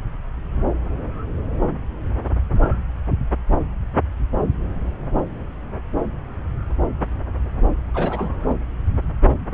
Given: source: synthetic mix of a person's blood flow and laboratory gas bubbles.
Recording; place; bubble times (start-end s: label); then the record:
Doppler ultrasound of blood flow; subclavian vein
7.94-8.54 s: bubbles
From the record:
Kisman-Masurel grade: 212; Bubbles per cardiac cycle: several, 3 to 8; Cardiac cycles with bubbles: 1 to 10%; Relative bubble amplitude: moderate (0.250 to 0.450); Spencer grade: 1 (occasional bubble signal discernible with the cardiac motion signal, with majority of cardiac periods free of bubbles); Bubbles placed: anywhere in the cardiac cycle